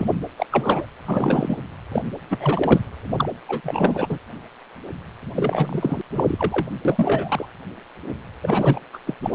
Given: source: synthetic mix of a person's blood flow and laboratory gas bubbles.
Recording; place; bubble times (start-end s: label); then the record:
Doppler ultrasound of blood flow; precordium
0.00-0.14 s: bubbles
0.38-0.46 s: bubbles
0.51-0.86 s: bubbles
1.06-1.56 s: bubbles
1.92-2.02 s: bubbles
2.29-2.81 s: bubbles
3.16-3.29 s: bubbles
3.48-4.18 s: bubbles
5.35-6.01 s: bubbles
6.12-6.67 s: bubbles
6.85-7.46 s: bubbles
8.42-8.79 s: bubbles
8.93-8.98 s: bubbles
9.06-9.15 s: bubbles
9.22-9.31 s: bubbles
From the record:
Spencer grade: 3 (all of the cardiac periods contain showers or single bubble signals, but not dominating or overriding the cardiac motion signals); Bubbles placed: anywhere in the cardiac cycle